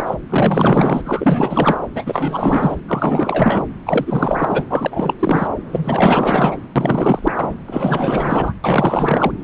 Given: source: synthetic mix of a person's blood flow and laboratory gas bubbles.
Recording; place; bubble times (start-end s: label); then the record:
Doppler ultrasound of blood flow; subclavian vein
0.00-0.14 s: bubbles
0.29-1.02 s: bubbles
1.04-1.78 s: bubbles
1.95-2.75 s: bubbles
2.88-3.64 s: bubbles
3.86-4.64 s: bubbles
4.70-5.13 s: bubbles
5.19-5.48 s: bubbles
5.72-6.58 s: bubbles
6.75-7.53 s: bubbles
7.67-8.53 s: bubbles
8.64-9.31 s: bubbles
From the record:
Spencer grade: 4 (maximum detectable bubble signal sounding continuously throughout systole and diastole of every cardiac period, and overriding the amplitude of the normal cardiac signals); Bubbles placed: anywhere in the cardiac cycle